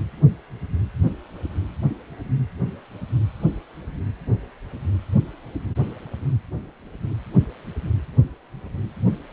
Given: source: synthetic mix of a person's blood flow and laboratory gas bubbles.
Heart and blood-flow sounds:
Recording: Doppler ultrasound of blood flow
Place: precordium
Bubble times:
no bubbles
From the record:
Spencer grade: 0 (complete lack of bubble signals)

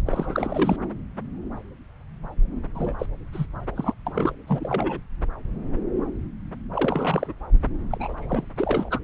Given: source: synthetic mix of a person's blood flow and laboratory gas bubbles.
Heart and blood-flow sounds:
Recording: Doppler ultrasound of blood flow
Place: subclavian vein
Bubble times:
0.06-0.76 s: bubbles
2.75-2.94 s: bubbles
2.98-3.06 s: bubbles
3.33-3.46 s: bubbles
3.75-3.94 s: bubbles
4.06-4.35 s: bubbles
4.47-4.99 s: bubbles
6.72-7.33 s: bubbles
7.90-8.46 s: bubbles
8.56-8.99 s: bubbles
From the record:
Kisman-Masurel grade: 332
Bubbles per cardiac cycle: rolling drumbeat, 9 or more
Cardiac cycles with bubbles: 50 to 99%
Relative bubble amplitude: moderate (0.250 to 0.450)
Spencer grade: 3 (all of the cardiac periods contain showers or single bubble signals, but not dominating or overriding the cardiac motion signals)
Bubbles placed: anywhere in the cardiac cycle

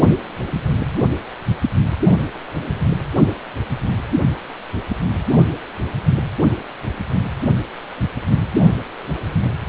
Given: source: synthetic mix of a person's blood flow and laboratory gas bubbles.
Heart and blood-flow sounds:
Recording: Doppler ultrasound of blood flow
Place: precordium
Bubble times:
no bubbles
From the record:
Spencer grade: 0 (complete lack of bubble signals)

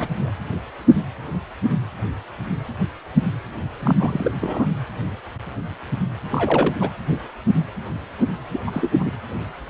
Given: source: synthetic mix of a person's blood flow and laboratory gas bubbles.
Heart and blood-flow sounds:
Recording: Doppler ultrasound of blood flow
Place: precordium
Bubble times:
0.00-0.08 s: bubbles
0.20-0.30 s: bubbles
3.82-4.32 s: bubbles
4.41-4.66 s: bubbles
6.32-6.90 s: bubbles
8.53-8.60 s: bubbles
8.67-9.13 s: bubbles
From the record:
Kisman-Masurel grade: 222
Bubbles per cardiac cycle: several, 3 to 8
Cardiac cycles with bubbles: 10 to 50%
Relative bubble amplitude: moderate (0.250 to 0.450)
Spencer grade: 2 (many but less than half of the cardiac periods contain bubble signals, singularly or in groups)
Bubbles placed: anywhere in the cardiac cycle

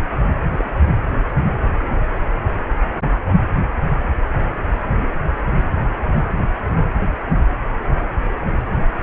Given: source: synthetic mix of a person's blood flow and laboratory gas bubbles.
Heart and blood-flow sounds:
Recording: Doppler ultrasound of blood flow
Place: precordium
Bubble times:
0.57-0.65 s: bubbles
From the record:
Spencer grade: 1 (occasional bubble signal discernible with the cardiac motion signal, with majority of cardiac periods free of bubbles)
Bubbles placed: anywhere in the cardiac cycle

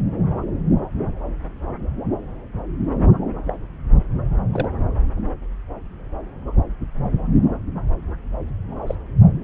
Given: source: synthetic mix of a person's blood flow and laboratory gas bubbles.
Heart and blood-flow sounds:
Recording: Doppler ultrasound of blood flow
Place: subclavian vein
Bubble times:
3.45-3.55 s: bubbles
4.52-4.69 s: bubbles
8.86-8.95 s: bubbles
From the record:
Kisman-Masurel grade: 121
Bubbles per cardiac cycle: 1 to 2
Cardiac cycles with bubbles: 10 to 50%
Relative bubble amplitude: barely perceptible (0.100 to 0.250)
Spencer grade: 2 (many but less than half of the cardiac periods contain bubble signals, singularly or in groups)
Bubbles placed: anywhere in the cardiac cycle

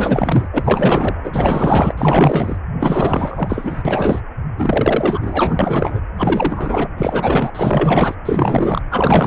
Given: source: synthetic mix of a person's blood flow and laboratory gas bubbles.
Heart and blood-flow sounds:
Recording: Doppler ultrasound of blood flow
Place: precordium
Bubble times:
0.00-0.49 s: bubbles
0.53-1.15 s: bubbles
1.23-1.92 s: bubbles
1.98-2.56 s: bubbles
2.79-4.21 s: bubbles
4.57-6.00 s: bubbles
6.17-6.89 s: bubbles
6.97-7.51 s: bubbles
7.54-8.15 s: bubbles
8.25-8.82 s: bubbles
8.91-9.27 s: bubbles
From the record:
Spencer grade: 4 (maximum detectable bubble signal sounding continuously throughout systole and diastole of every cardiac period, and overriding the amplitude of the normal cardiac signals)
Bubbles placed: anywhere in the cardiac cycle

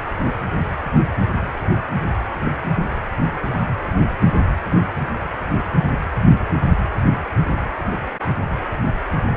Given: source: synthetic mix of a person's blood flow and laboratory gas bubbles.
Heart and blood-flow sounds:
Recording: Doppler ultrasound of blood flow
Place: precordium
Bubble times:
no bubbles
From the record:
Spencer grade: 0 (complete lack of bubble signals)

